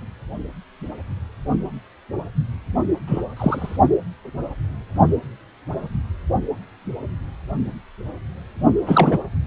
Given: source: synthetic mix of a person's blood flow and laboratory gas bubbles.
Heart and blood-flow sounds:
Doppler ultrasound of blood flow; precordium
3.07-3.21 s: bubbles
3.36-3.76 s: bubbles
8.86-9.18 s: bubbles
From the record:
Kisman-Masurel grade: 223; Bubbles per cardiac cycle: several, 3 to 8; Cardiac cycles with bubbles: 10 to 50%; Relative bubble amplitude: loud (0.450 to 0.775); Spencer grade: 2 (many but less than half of the cardiac periods contain bubble signals, singularly or in groups); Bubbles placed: only in the low amplitude regions of the cardiac cycle

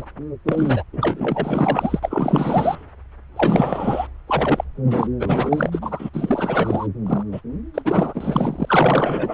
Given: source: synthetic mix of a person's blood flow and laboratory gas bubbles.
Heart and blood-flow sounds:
Doppler ultrasound of blood flow; subclavian vein
0.00-0.05 s: bubbles
0.46-0.83 s: bubbles
0.92-1.99 s: bubbles
2.02-2.85 s: bubbles
3.36-4.08 s: bubbles
4.27-4.64 s: bubbles
4.83-5.07 s: bubbles
5.19-6.09 s: bubbles
6.13-6.87 s: bubbles
7.06-7.23 s: bubbles
7.31-7.41 s: bubbles
7.74-9.34 s: bubbles
From the record:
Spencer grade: 4 (maximum detectable bubble signal sounding continuously throughout systole and diastole of every cardiac period, and overriding the amplitude of the normal cardiac signals); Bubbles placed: anywhere in the cardiac cycle

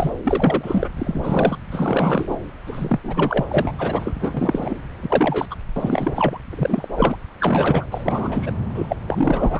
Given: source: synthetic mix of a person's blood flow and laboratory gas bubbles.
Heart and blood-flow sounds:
Doppler ultrasound of blood flow; subclavian vein
0.00-0.11 s: bubbles
0.23-0.90 s: bubbles
0.97-1.57 s: bubbles
1.71-2.37 s: bubbles
2.66-2.99 s: bubbles
3.03-3.44 s: bubbles
3.51-3.71 s: bubbles
3.78-4.13 s: bubbles
4.20-4.75 s: bubbles
5.02-5.47 s: bubbles
5.50-5.55 s: bubbles
5.76-6.38 s: bubbles
6.50-6.88 s: bubbles
6.97-7.16 s: bubbles
7.40-7.84 s: bubbles
7.91-8.54 s: bubbles
8.74-8.96 s: bubbles
9.08-9.60 s: bubbles
From the record:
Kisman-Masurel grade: 342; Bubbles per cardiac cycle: rolling drumbeat, 9 or more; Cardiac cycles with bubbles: 100%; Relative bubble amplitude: moderate (0.250 to 0.450); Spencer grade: 3 (all of the cardiac periods contain showers or single bubble signals, but not dominating or overriding the cardiac motion signals); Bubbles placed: anywhere in the cardiac cycle

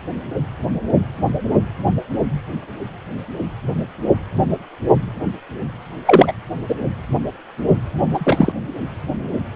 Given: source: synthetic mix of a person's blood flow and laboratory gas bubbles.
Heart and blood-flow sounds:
Doppler ultrasound of blood flow; precordium
6.05-6.33 s: bubbles
6.68-6.75 s: bubbles
8.13-8.52 s: bubbles
From the record:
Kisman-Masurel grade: 223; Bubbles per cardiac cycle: several, 3 to 8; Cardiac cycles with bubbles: 10 to 50%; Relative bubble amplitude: loud (0.450 to 0.775); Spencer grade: 2 (many but less than half of the cardiac periods contain bubble signals, singularly or in groups); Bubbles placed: anywhere in the cardiac cycle

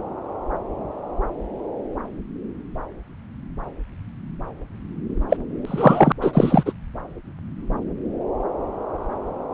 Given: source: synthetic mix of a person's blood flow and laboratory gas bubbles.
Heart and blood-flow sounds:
Doppler ultrasound of blood flow; subclavian vein
5.29-5.37 s: bubbles
5.66-6.12 s: bubbles
6.21-6.72 s: bubbles
From the record:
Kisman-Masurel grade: 223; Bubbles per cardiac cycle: several, 3 to 8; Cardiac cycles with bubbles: 10 to 50%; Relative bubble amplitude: loud (0.450 to 0.775); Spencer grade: 2 (many but less than half of the cardiac periods contain bubble signals, singularly or in groups); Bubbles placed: anywhere in the cardiac cycle

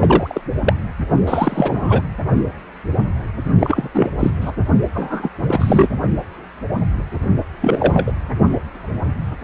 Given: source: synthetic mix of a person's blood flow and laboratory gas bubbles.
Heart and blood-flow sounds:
Doppler ultrasound of blood flow; precordium
0.00-0.41 s: bubbles
0.65-0.74 s: bubbles
1.27-2.02 s: bubbles
3.59-3.90 s: bubbles
3.94-4.10 s: bubbles
4.19-4.30 s: bubbles
4.41-4.52 s: bubbles
4.95-5.29 s: bubbles
5.40-5.88 s: bubbles
7.61-8.12 s: bubbles
From the record:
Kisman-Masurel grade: 233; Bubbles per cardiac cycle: several, 3 to 8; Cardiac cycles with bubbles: 50 to 99%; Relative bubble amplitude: loud (0.450 to 0.775); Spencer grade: 3 (all of the cardiac periods contain showers or single bubble signals, but not dominating or overriding the cardiac motion signals); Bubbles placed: only in the low amplitude regions of the cardiac cycle

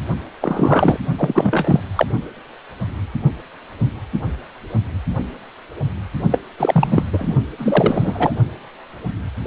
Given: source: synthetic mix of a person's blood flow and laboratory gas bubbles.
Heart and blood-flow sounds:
Doppler ultrasound of blood flow; precordium
0.41-0.98 s: bubbles
1.18-1.80 s: bubbles
1.95-2.07 s: bubbles
6.31-6.40 s: bubbles
6.58-7.03 s: bubbles
7.12-7.34 s: bubbles
7.58-8.34 s: bubbles
From the record:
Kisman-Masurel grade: 333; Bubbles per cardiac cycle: rolling drumbeat, 9 or more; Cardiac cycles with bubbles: 50 to 99%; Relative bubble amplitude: loud (0.450 to 0.775); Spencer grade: 3 (all of the cardiac periods contain showers or single bubble signals, but not dominating or overriding the cardiac motion signals); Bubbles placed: only in the low amplitude regions of the cardiac cycle

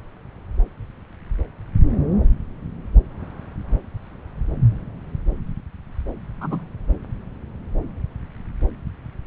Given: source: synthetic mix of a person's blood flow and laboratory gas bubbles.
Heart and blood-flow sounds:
Doppler ultrasound of blood flow; subclavian vein
6.41-6.64 s: bubbles
From the record:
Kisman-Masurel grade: 112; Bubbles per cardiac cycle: 1 to 2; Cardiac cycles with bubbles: 1 to 10%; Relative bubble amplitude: moderate (0.250 to 0.450); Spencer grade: 1 (occasional bubble signal discernible with the cardiac motion signal, with majority of cardiac periods free of bubbles); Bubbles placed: anywhere in the cardiac cycle

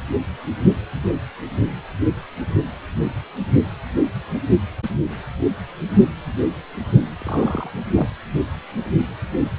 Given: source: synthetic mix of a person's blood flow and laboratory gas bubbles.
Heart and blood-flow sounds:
Doppler ultrasound of blood flow; precordium
7.20-7.70 s: bubbles
7.94-8.07 s: bubbles
From the record:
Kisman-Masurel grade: 112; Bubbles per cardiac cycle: 1 to 2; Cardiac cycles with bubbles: 1 to 10%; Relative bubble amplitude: moderate (0.250 to 0.450); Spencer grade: 1 (occasional bubble signal discernible with the cardiac motion signal, with majority of cardiac periods free of bubbles); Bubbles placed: anywhere in the cardiac cycle

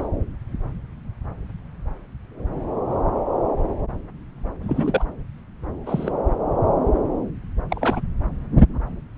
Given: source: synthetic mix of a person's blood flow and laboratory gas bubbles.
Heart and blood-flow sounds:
Doppler ultrasound of blood flow; subclavian vein
0.03-0.07 s: bubbles
4.62-5.04 s: bubbles
5.86-6.12 s: bubbles
7.70-8.02 s: bubbles
From the record:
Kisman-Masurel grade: 222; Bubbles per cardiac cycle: several, 3 to 8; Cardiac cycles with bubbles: 10 to 50%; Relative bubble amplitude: moderate (0.250 to 0.450); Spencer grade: 2 (many but less than half of the cardiac periods contain bubble signals, singularly or in groups); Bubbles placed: anywhere in the cardiac cycle

